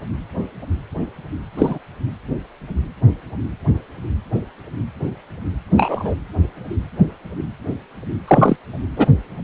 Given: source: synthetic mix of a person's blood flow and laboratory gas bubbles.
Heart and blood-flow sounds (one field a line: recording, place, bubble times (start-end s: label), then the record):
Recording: Doppler ultrasound of blood flow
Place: precordium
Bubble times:
1.56-1.79 s: bubbles
5.75-6.15 s: bubbles
8.27-8.56 s: bubbles
8.96-9.08 s: bubbles
From the record:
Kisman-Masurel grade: 123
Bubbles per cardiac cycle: 1 to 2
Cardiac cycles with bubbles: 10 to 50%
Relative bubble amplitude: loud (0.450 to 0.775)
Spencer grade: 2 (many but less than half of the cardiac periods contain bubble signals, singularly or in groups)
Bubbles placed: anywhere in the cardiac cycle